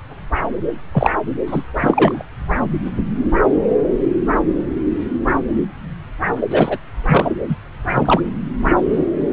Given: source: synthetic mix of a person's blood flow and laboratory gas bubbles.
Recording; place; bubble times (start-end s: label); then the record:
Doppler ultrasound of blood flow; subclavian vein
0.94-1.10 s: bubbles
1.46-1.61 s: bubbles
1.82-2.23 s: bubbles
6.50-6.77 s: bubbles
7.08-7.29 s: bubbles
7.48-7.55 s: bubbles
7.95-8.21 s: bubbles
From the record:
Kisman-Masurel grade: 223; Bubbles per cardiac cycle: several, 3 to 8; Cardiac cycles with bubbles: 10 to 50%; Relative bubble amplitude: loud (0.450 to 0.775); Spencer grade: 2 (many but less than half of the cardiac periods contain bubble signals, singularly or in groups); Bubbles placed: anywhere in the cardiac cycle